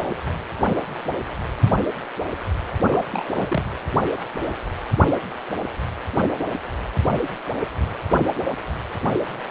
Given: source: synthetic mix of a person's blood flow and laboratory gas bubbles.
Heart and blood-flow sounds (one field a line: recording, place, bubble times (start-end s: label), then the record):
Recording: Doppler ultrasound of blood flow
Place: precordium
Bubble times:
2.82-3.04 s: bubbles
3.11-3.62 s: bubbles
From the record:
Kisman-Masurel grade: 212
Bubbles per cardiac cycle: several, 3 to 8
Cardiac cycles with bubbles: 1 to 10%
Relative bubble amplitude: moderate (0.250 to 0.450)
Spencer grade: 1 (occasional bubble signal discernible with the cardiac motion signal, with majority of cardiac periods free of bubbles)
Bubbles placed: anywhere in the cardiac cycle